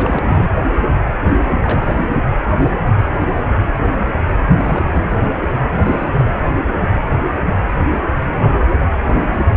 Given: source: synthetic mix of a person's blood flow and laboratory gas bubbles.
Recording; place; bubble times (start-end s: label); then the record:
Doppler ultrasound of blood flow; precordium
0.00-0.51 s: bubbles
1.63-2.09 s: bubbles
4.49-5.02 s: bubbles
5.68-6.25 s: bubbles
From the record:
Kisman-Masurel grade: 221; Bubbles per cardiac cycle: several, 3 to 8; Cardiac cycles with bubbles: 10 to 50%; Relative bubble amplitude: barely perceptible (0.100 to 0.250); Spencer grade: 2 (many but less than half of the cardiac periods contain bubble signals, singularly or in groups); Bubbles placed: anywhere in the cardiac cycle